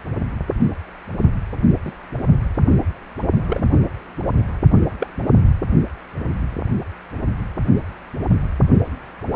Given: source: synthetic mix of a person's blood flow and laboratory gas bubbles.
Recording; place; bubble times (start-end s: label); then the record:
Doppler ultrasound of blood flow; precordium
1.85-1.92 s: bubbles
3.47-3.66 s: bubbles
4.99-5.07 s: bubbles
From the record:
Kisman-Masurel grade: 122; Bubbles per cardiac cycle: 1 to 2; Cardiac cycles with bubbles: 10 to 50%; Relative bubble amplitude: moderate (0.250 to 0.450); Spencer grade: 2 (many but less than half of the cardiac periods contain bubble signals, singularly or in groups); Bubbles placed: only in the low amplitude regions of the cardiac cycle